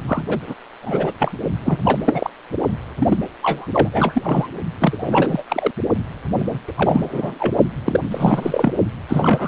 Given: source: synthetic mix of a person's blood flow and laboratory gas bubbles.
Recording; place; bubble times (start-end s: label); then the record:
Doppler ultrasound of blood flow; precordium
0.07-0.39 s: bubbles
0.46-0.55 s: bubbles
0.82-1.12 s: bubbles
1.19-1.31 s: bubbles
1.64-2.00 s: bubbles
2.06-2.30 s: bubbles
2.99-3.18 s: bubbles
3.43-3.67 s: bubbles
3.73-3.89 s: bubbles
3.92-4.47 s: bubbles
4.78-5.43 s: bubbles
5.48-5.71 s: bubbles
6.38-6.59 s: bubbles
6.67-6.71 s: bubbles
6.75-7.54 s: bubbles
7.84-8.01 s: bubbles
8.11-8.73 s: bubbles
9.09-9.47 s: bubbles
From the record:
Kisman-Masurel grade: 342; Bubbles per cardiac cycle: rolling drumbeat, 9 or more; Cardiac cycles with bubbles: 100%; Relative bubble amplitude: moderate (0.250 to 0.450); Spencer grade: 3 (all of the cardiac periods contain showers or single bubble signals, but not dominating or overriding the cardiac motion signals); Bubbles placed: only in the low amplitude regions of the cardiac cycle